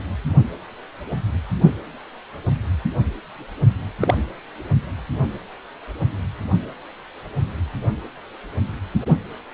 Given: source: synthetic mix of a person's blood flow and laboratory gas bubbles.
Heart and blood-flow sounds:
Doppler ultrasound of blood flow; precordium
3.99-4.16 s: bubbles
From the record:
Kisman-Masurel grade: 122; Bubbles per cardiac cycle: 1 to 2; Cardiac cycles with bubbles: 10 to 50%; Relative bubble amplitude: moderate (0.250 to 0.450); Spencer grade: 2 (many but less than half of the cardiac periods contain bubble signals, singularly or in groups); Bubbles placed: only in the low amplitude regions of the cardiac cycle

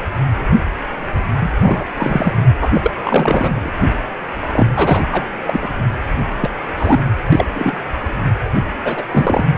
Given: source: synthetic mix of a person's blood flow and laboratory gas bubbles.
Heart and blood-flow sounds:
Doppler ultrasound of blood flow; precordium
1.40-1.53 s: bubbles
1.62-1.84 s: bubbles
1.97-2.33 s: bubbles
2.59-2.71 s: bubbles
2.74-2.91 s: bubbles
3.04-3.71 s: bubbles
4.52-4.67 s: bubbles
4.75-5.02 s: bubbles
5.11-5.27 s: bubbles
5.47-5.70 s: bubbles
6.41-6.50 s: bubbles
6.78-7.00 s: bubbles
7.33-7.46 s: bubbles
7.52-7.78 s: bubbles
8.84-9.03 s: bubbles
9.12-9.50 s: bubbles
From the record:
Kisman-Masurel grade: 233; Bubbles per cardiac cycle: several, 3 to 8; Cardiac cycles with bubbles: 50 to 99%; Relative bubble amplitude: loud (0.450 to 0.775); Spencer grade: 3 (all of the cardiac periods contain showers or single bubble signals, but not dominating or overriding the cardiac motion signals); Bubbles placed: anywhere in the cardiac cycle

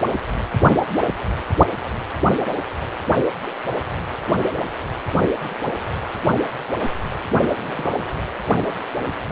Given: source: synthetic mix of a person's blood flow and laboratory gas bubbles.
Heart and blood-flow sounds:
Doppler ultrasound of blood flow; precordium
7.55-8.08 s: bubbles
From the record:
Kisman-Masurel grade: 211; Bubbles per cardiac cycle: several, 3 to 8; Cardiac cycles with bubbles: 1 to 10%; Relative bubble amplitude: barely perceptible (0.100 to 0.250); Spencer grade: 1 (occasional bubble signal discernible with the cardiac motion signal, with majority of cardiac periods free of bubbles); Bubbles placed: anywhere in the cardiac cycle

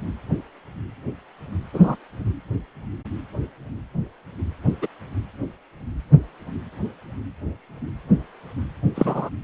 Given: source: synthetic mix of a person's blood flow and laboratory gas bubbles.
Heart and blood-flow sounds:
Doppler ultrasound of blood flow; precordium
1.73-1.96 s: bubbles
4.82-4.88 s: bubbles
8.95-9.29 s: bubbles
From the record:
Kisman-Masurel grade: 123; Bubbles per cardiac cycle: 1 to 2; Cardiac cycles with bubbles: 10 to 50%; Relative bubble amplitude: loud (0.450 to 0.775); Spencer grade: 2 (many but less than half of the cardiac periods contain bubble signals, singularly or in groups); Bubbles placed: anywhere in the cardiac cycle

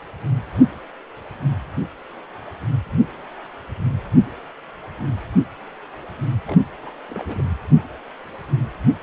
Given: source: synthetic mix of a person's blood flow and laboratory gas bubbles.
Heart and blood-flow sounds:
Doppler ultrasound of blood flow; precordium
6.46-6.60 s: bubbles
6.82-6.91 s: bubbles
7.09-7.43 s: bubbles
From the record:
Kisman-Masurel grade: 211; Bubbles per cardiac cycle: several, 3 to 8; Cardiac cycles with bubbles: 1 to 10%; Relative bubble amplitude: barely perceptible (0.100 to 0.250); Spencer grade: 1 (occasional bubble signal discernible with the cardiac motion signal, with majority of cardiac periods free of bubbles); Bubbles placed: anywhere in the cardiac cycle

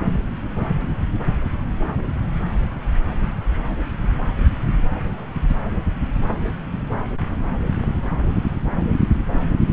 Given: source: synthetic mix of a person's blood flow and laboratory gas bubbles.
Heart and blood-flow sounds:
Doppler ultrasound of blood flow; subclavian vein
no bubbles
From the record:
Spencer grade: 0 (complete lack of bubble signals)

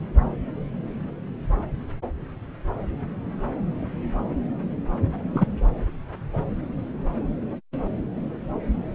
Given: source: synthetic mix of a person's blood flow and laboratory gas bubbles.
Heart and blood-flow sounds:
Doppler ultrasound of blood flow; subclavian vein
5.34-5.45 s: bubbles
From the record:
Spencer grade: 1 (occasional bubble signal discernible with the cardiac motion signal, with majority of cardiac periods free of bubbles); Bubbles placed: anywhere in the cardiac cycle

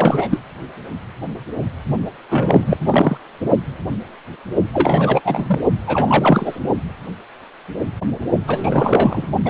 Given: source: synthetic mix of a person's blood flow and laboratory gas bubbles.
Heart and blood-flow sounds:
Doppler ultrasound of blood flow; precordium
0.00-0.38 s: bubbles
2.29-2.77 s: bubbles
2.84-3.17 s: bubbles
4.73-5.20 s: bubbles
5.25-5.60 s: bubbles
5.87-6.59 s: bubbles
8.46-9.27 s: bubbles
9.45-9.50 s: bubbles
From the record:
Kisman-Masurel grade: 333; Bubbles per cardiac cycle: rolling drumbeat, 9 or more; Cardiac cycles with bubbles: 50 to 99%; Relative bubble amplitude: loud (0.450 to 0.775); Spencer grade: 3 (all of the cardiac periods contain showers or single bubble signals, but not dominating or overriding the cardiac motion signals); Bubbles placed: only in the low amplitude regions of the cardiac cycle

